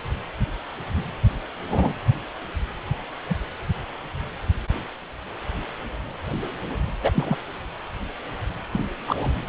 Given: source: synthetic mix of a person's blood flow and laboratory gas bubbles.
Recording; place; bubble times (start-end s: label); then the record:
Doppler ultrasound of blood flow; precordium
1.69-1.94 s: bubbles
3.29-3.35 s: bubbles
7.01-7.37 s: bubbles
8.72-8.88 s: bubbles
9.07-9.30 s: bubbles
From the record:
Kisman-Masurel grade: 122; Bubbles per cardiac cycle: 1 to 2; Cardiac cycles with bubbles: 10 to 50%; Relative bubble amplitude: moderate (0.250 to 0.450); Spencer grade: 2 (many but less than half of the cardiac periods contain bubble signals, singularly or in groups); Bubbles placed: anywhere in the cardiac cycle